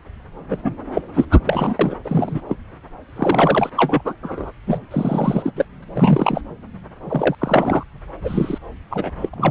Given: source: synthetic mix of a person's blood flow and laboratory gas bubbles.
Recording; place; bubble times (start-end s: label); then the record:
Doppler ultrasound of blood flow; subclavian vein
0.50-0.57 s: bubbles
0.64-0.73 s: bubbles
0.94-1.01 s: bubbles
1.14-1.25 s: bubbles
1.31-1.40 s: bubbles
1.45-1.75 s: bubbles
1.79-1.96 s: bubbles
2.04-2.41 s: bubbles
2.49-2.57 s: bubbles
3.15-3.69 s: bubbles
3.76-4.02 s: bubbles
4.04-4.13 s: bubbles
4.22-4.51 s: bubbles
4.67-4.88 s: bubbles
4.91-5.51 s: bubbles
5.55-5.65 s: bubbles
5.82-5.84 s: bubbles
5.95-6.41 s: bubbles
7.05-7.35 s: bubbles
7.38-7.83 s: bubbles
8.24-8.58 s: bubbles
8.90-9.12 s: bubbles
9.18-9.29 s: bubbles
9.37-9.51 s: bubbles
From the record:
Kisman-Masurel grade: 342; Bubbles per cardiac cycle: rolling drumbeat, 9 or more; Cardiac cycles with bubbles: 100%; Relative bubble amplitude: moderate (0.250 to 0.450); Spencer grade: 3 (all of the cardiac periods contain showers or single bubble signals, but not dominating or overriding the cardiac motion signals); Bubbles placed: anywhere in the cardiac cycle